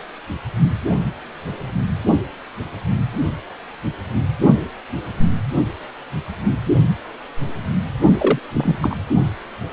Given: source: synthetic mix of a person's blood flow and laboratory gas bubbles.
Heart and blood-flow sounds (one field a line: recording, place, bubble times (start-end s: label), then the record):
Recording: Doppler ultrasound of blood flow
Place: precordium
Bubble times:
8.19-8.39 s: bubbles
8.53-8.78 s: bubbles
8.81-8.96 s: bubbles
From the record:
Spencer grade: 1 (occasional bubble signal discernible with the cardiac motion signal, with majority of cardiac periods free of bubbles)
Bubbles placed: only in the low amplitude regions of the cardiac cycle